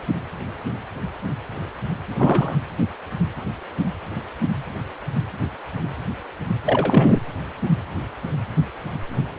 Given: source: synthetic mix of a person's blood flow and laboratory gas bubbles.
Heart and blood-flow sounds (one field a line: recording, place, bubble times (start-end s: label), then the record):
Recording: Doppler ultrasound of blood flow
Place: precordium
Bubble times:
2.17-2.58 s: bubbles
6.66-7.21 s: bubbles
From the record:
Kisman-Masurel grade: 212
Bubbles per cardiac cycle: several, 3 to 8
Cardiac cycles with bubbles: 1 to 10%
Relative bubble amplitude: moderate (0.250 to 0.450)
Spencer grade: 1 (occasional bubble signal discernible with the cardiac motion signal, with majority of cardiac periods free of bubbles)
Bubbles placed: anywhere in the cardiac cycle